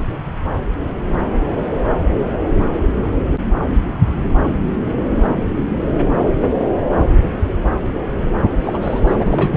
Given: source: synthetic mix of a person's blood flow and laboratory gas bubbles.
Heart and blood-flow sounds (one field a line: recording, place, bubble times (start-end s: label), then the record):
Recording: Doppler ultrasound of blood flow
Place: subclavian vein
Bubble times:
8.63-8.79 s: bubbles
8.81-9.01 s: bubbles
9.07-9.57 s: bubbles
From the record:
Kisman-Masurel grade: 212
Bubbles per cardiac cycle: several, 3 to 8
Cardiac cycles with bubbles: 1 to 10%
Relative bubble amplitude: moderate (0.250 to 0.450)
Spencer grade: 1 (occasional bubble signal discernible with the cardiac motion signal, with majority of cardiac periods free of bubbles)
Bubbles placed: anywhere in the cardiac cycle